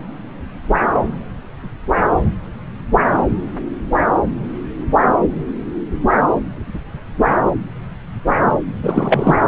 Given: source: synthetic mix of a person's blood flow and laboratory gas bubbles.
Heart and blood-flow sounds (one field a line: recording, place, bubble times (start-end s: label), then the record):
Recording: Doppler ultrasound of blood flow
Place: subclavian vein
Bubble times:
8.83-9.36 s: bubbles
From the record:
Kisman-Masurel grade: 213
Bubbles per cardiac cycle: several, 3 to 8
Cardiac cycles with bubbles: 1 to 10%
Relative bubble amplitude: loud (0.450 to 0.775)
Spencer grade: 1 (occasional bubble signal discernible with the cardiac motion signal, with majority of cardiac periods free of bubbles)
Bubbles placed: anywhere in the cardiac cycle